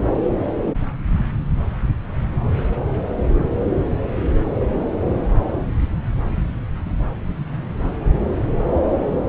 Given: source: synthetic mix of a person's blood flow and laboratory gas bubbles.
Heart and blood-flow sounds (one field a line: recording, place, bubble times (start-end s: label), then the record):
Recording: Doppler ultrasound of blood flow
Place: subclavian vein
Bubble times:
no bubbles
From the record:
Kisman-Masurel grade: 000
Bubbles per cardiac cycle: 0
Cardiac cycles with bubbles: 0%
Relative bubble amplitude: no bubbles discernible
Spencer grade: 0 (complete lack of bubble signals)